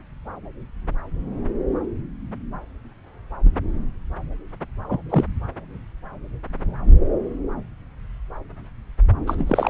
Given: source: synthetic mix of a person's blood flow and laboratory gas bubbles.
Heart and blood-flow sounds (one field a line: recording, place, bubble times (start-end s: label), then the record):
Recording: Doppler ultrasound of blood flow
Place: subclavian vein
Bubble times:
4.88-5.00 s: bubbles
5.10-5.24 s: bubbles
9.27-9.70 s: bubbles
From the record:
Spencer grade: 1 (occasional bubble signal discernible with the cardiac motion signal, with majority of cardiac periods free of bubbles)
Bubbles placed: anywhere in the cardiac cycle